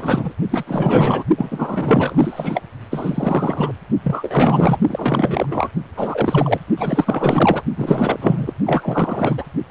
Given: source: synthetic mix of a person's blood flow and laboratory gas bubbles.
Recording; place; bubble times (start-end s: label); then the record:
Doppler ultrasound of blood flow; precordium
0.00-0.34 s: bubbles
0.50-0.64 s: bubbles
0.67-1.24 s: bubbles
1.37-2.62 s: bubbles
2.90-3.72 s: bubbles
4.03-4.78 s: bubbles
4.88-5.71 s: bubbles
5.96-6.59 s: bubbles
6.77-7.61 s: bubbles
7.76-8.53 s: bubbles
8.66-9.45 s: bubbles
From the record:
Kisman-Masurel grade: 444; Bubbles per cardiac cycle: continuous sound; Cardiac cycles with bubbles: 100%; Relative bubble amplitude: maximal (0.775 to 0.999); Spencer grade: 4 (maximum detectable bubble signal sounding continuously throughout systole and diastole of every cardiac period, and overriding the amplitude of the normal cardiac signals); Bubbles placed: only in the low amplitude regions of the cardiac cycle